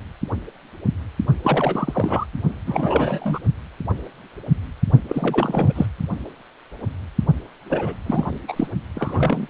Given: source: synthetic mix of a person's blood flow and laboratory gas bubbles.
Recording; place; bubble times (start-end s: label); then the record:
Doppler ultrasound of blood flow; precordium
1.43-2.26 s: bubbles
2.67-3.40 s: bubbles
5.08-5.72 s: bubbles
5.75-5.86 s: bubbles
7.69-7.96 s: bubbles
8.06-8.38 s: bubbles
8.48-8.68 s: bubbles
8.95-9.50 s: bubbles
From the record:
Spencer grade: 3 (all of the cardiac periods contain showers or single bubble signals, but not dominating or overriding the cardiac motion signals); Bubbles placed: only in the low amplitude regions of the cardiac cycle